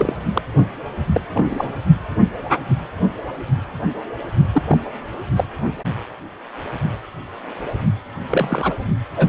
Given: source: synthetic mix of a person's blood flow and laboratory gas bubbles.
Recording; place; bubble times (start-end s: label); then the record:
Doppler ultrasound of blood flow; precordium
0.00-0.15 s: bubbles
0.34-0.41 s: bubbles
1.07-1.20 s: bubbles
1.33-1.79 s: bubbles
4.54-4.62 s: bubbles
4.67-4.79 s: bubbles
5.35-5.44 s: bubbles
8.28-8.74 s: bubbles
9.16-9.29 s: bubbles
From the record:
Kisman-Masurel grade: 233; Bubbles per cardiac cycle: several, 3 to 8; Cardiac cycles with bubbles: 50 to 99%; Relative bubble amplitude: loud (0.450 to 0.775); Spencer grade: 3 (all of the cardiac periods contain showers or single bubble signals, but not dominating or overriding the cardiac motion signals); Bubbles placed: only in the low amplitude regions of the cardiac cycle